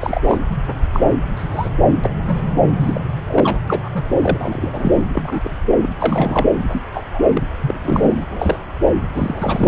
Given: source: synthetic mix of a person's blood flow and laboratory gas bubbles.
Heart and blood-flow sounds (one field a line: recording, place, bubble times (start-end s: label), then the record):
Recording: Doppler ultrasound of blood flow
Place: subclavian vein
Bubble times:
0.01-0.21 s: bubbles
0.24-0.40 s: bubbles
0.93-1.15 s: bubbles
1.36-1.70 s: bubbles
2.04-2.37 s: bubbles
2.76-3.01 s: bubbles
3.27-3.58 s: bubbles
3.67-3.90 s: bubbles
3.94-4.04 s: bubbles
4.21-4.92 s: bubbles
5.12-5.55 s: bubbles
5.76-5.90 s: bubbles
6.00-6.46 s: bubbles
6.72-6.84 s: bubbles
6.93-7.04 s: bubbles
7.14-7.22 s: bubbles
7.33-7.42 s: bubbles
7.61-7.75 s: bubbles
7.83-8.24 s: bubbles
8.30-8.58 s: bubbles
9.14-9.68 s: bubbles
From the record:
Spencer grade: 3 (all of the cardiac periods contain showers or single bubble signals, but not dominating or overriding the cardiac motion signals)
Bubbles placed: anywhere in the cardiac cycle